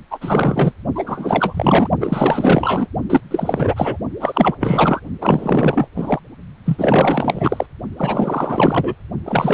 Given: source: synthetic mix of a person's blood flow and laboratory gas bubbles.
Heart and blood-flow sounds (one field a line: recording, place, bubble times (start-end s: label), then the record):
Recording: Doppler ultrasound of blood flow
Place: precordium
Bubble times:
0.10-0.73 s: bubbles
0.95-1.89 s: bubbles
2.00-2.87 s: bubbles
3.10-3.21 s: bubbles
3.31-3.98 s: bubbles
4.20-4.55 s: bubbles
4.59-5.00 s: bubbles
5.21-5.88 s: bubbles
5.96-6.20 s: bubbles
6.66-7.66 s: bubbles
7.97-8.93 s: bubbles
9.24-9.53 s: bubbles
From the record:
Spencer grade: 4 (maximum detectable bubble signal sounding continuously throughout systole and diastole of every cardiac period, and overriding the amplitude of the normal cardiac signals)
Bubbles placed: only in the low amplitude regions of the cardiac cycle